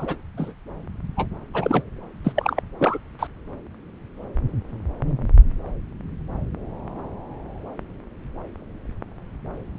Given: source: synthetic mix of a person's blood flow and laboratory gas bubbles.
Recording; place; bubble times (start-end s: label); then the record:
Doppler ultrasound of blood flow; subclavian vein
0.00-0.16 s: bubbles
0.37-0.53 s: bubbles
1.16-1.27 s: bubbles
1.53-1.83 s: bubbles
2.24-2.32 s: bubbles
2.35-2.60 s: bubbles
2.79-2.99 s: bubbles
3.19-3.27 s: bubbles
From the record:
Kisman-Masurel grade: 222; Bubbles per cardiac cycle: several, 3 to 8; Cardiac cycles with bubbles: 10 to 50%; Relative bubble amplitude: moderate (0.250 to 0.450); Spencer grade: 2 (many but less than half of the cardiac periods contain bubble signals, singularly or in groups); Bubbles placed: anywhere in the cardiac cycle